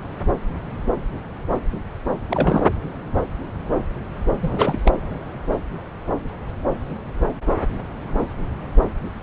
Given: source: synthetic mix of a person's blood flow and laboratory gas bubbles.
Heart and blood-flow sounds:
Doppler ultrasound of blood flow; subclavian vein
2.21-2.68 s: bubbles
4.41-4.79 s: bubbles
4.85-4.93 s: bubbles
From the record:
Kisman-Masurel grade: 212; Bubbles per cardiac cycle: several, 3 to 8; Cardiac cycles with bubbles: 1 to 10%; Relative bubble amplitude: moderate (0.250 to 0.450); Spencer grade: 1 (occasional bubble signal discernible with the cardiac motion signal, with majority of cardiac periods free of bubbles); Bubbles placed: anywhere in the cardiac cycle

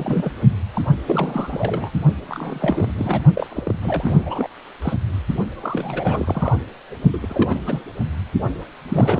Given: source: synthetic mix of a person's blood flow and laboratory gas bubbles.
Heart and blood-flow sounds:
Doppler ultrasound of blood flow; precordium
0.00-0.33 s: bubbles
0.74-0.81 s: bubbles
1.05-1.91 s: bubbles
2.28-2.92 s: bubbles
2.96-3.21 s: bubbles
3.33-3.46 s: bubbles
3.49-3.75 s: bubbles
3.82-4.48 s: bubbles
4.82-4.94 s: bubbles
5.52-6.53 s: bubbles
7.12-7.83 s: bubbles
8.88-9.20 s: bubbles
From the record:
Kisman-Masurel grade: 342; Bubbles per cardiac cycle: rolling drumbeat, 9 or more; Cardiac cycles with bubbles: 100%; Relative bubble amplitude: moderate (0.250 to 0.450); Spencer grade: 3 (all of the cardiac periods contain showers or single bubble signals, but not dominating or overriding the cardiac motion signals); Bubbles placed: only in the low amplitude regions of the cardiac cycle

